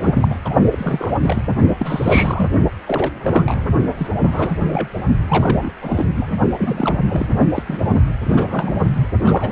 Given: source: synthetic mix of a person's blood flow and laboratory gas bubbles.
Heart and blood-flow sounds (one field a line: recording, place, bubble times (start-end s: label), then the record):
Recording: Doppler ultrasound of blood flow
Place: precordium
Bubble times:
0.00-0.39 s: bubbles
0.44-0.54 s: bubbles
0.71-1.43 s: bubbles
1.79-2.51 s: bubbles
2.87-3.11 s: bubbles
3.21-3.55 s: bubbles
3.97-4.08 s: bubbles
4.16-4.89 s: bubbles
5.28-5.71 s: bubbles
5.82-6.05 s: bubbles
6.15-6.37 s: bubbles
6.58-6.97 s: bubbles
7.09-7.34 s: bubbles
7.55-7.63 s: bubbles
7.67-8.01 s: bubbles
8.23-8.84 s: bubbles
8.93-9.07 s: bubbles
9.24-9.52 s: bubbles
From the record:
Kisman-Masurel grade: 342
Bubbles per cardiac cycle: rolling drumbeat, 9 or more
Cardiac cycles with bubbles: 100%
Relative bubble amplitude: moderate (0.250 to 0.450)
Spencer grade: 3 (all of the cardiac periods contain showers or single bubble signals, but not dominating or overriding the cardiac motion signals)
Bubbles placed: only in the low amplitude regions of the cardiac cycle